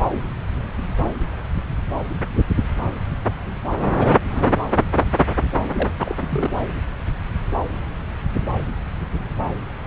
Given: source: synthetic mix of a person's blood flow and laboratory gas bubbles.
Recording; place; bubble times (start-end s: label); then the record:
Doppler ultrasound of blood flow; subclavian vein
3.99-4.18 s: bubbles
4.29-4.56 s: bubbles
5.73-5.92 s: bubbles
6.00-6.15 s: bubbles
6.22-6.50 s: bubbles
From the record:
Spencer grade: 2 (many but less than half of the cardiac periods contain bubble signals, singularly or in groups); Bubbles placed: anywhere in the cardiac cycle